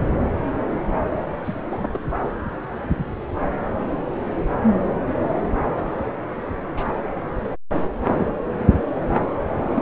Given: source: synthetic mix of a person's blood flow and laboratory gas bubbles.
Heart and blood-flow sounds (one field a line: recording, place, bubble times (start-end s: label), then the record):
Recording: Doppler ultrasound of blood flow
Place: subclavian vein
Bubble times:
1.45-1.54 s: bubbles
1.69-1.99 s: bubbles
3.88-3.99 s: bubbles
6.69-6.83 s: bubbles
8.03-8.26 s: bubbles
9.76-9.82 s: bubbles
From the record:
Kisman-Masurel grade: 121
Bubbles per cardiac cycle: 1 to 2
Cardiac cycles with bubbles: 10 to 50%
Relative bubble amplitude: barely perceptible (0.100 to 0.250)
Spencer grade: 2 (many but less than half of the cardiac periods contain bubble signals, singularly or in groups)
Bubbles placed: anywhere in the cardiac cycle